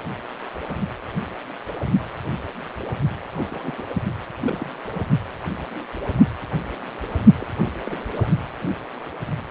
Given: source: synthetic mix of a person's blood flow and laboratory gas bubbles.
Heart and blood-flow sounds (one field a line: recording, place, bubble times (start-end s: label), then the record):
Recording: Doppler ultrasound of blood flow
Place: precordium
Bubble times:
3.33-3.84 s: bubbles
3.88-3.94 s: bubbles
4.42-4.70 s: bubbles
4.94-5.01 s: bubbles
7.38-7.46 s: bubbles
7.67-7.71 s: bubbles
7.85-7.97 s: bubbles
8.15-8.32 s: bubbles
From the record:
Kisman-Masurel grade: 221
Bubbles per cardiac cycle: several, 3 to 8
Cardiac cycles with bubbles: 10 to 50%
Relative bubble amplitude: barely perceptible (0.100 to 0.250)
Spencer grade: 2 (many but less than half of the cardiac periods contain bubble signals, singularly or in groups)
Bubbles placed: only in the low amplitude regions of the cardiac cycle